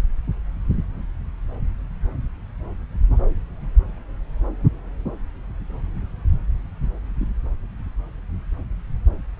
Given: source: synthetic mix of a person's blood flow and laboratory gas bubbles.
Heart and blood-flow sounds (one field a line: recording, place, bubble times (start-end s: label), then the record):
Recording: Doppler ultrasound of blood flow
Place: subclavian vein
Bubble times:
7.19-7.26 s: bubbles
From the record:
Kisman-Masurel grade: 111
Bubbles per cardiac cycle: 1 to 2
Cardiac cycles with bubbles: 1 to 10%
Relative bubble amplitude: barely perceptible (0.100 to 0.250)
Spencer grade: 1 (occasional bubble signal discernible with the cardiac motion signal, with majority of cardiac periods free of bubbles)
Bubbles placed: anywhere in the cardiac cycle